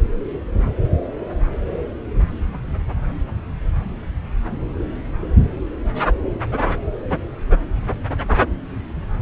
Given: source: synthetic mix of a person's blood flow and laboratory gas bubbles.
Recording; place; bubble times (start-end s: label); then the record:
Doppler ultrasound of blood flow; subclavian vein
no bubbles
From the record:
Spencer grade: 0 (complete lack of bubble signals)